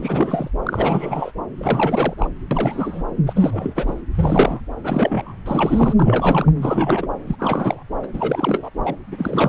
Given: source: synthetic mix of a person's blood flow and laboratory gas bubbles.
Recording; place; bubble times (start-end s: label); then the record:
Doppler ultrasound of blood flow; subclavian vein
0.00-0.50 s: bubbles
0.63-1.31 s: bubbles
1.57-2.14 s: bubbles
2.18-2.29 s: bubbles
2.50-3.02 s: bubbles
3.26-3.33 s: bubbles
3.35-4.01 s: bubbles
4.15-4.60 s: bubbles
4.83-5.33 s: bubbles
5.46-5.94 s: bubbles
5.96-6.53 s: bubbles
6.57-7.08 s: bubbles
7.26-7.36 s: bubbles
7.39-7.83 s: bubbles
8.02-8.07 s: bubbles
8.13-8.70 s: bubbles
8.83-8.96 s: bubbles
9.11-9.49 s: bubbles
From the record:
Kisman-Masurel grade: 343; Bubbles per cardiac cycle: rolling drumbeat, 9 or more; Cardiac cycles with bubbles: 100%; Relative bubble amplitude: loud (0.450 to 0.775); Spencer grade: 3 (all of the cardiac periods contain showers or single bubble signals, but not dominating or overriding the cardiac motion signals); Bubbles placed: anywhere in the cardiac cycle